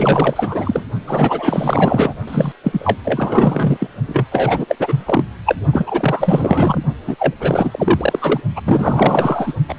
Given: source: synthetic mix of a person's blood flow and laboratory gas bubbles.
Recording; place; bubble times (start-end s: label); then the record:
Doppler ultrasound of blood flow; precordium
0.00-0.84 s: bubbles
1.07-2.14 s: bubbles
2.27-2.53 s: bubbles
2.64-2.97 s: bubbles
3.05-3.87 s: bubbles
4.08-4.25 s: bubbles
4.31-4.66 s: bubbles
4.68-4.75 s: bubbles
4.79-5.25 s: bubbles
5.46-5.56 s: bubbles
5.72-6.83 s: bubbles
7.07-7.15 s: bubbles
7.18-7.34 s: bubbles
7.39-8.41 s: bubbles
8.55-8.61 s: bubbles
8.64-9.54 s: bubbles
9.69-9.74 s: bubbles
From the record:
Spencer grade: 4 (maximum detectable bubble signal sounding continuously throughout systole and diastole of every cardiac period, and overriding the amplitude of the normal cardiac signals); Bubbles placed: only in the low amplitude regions of the cardiac cycle